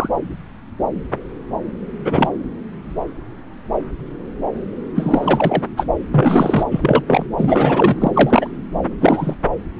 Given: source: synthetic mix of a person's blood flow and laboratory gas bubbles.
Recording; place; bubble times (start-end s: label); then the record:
Doppler ultrasound of blood flow; subclavian vein
0.00-0.10 s: bubbles
2.04-2.29 s: bubbles
4.95-5.63 s: bubbles
5.77-5.86 s: bubbles
6.10-6.63 s: bubbles
6.71-7.04 s: bubbles
7.07-7.25 s: bubbles
7.37-8.11 s: bubbles
8.13-8.48 s: bubbles
9.01-9.36 s: bubbles
From the record:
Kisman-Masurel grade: 233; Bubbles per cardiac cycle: several, 3 to 8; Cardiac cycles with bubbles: 50 to 99%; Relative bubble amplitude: loud (0.450 to 0.775); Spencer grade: 3 (all of the cardiac periods contain showers or single bubble signals, but not dominating or overriding the cardiac motion signals); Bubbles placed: anywhere in the cardiac cycle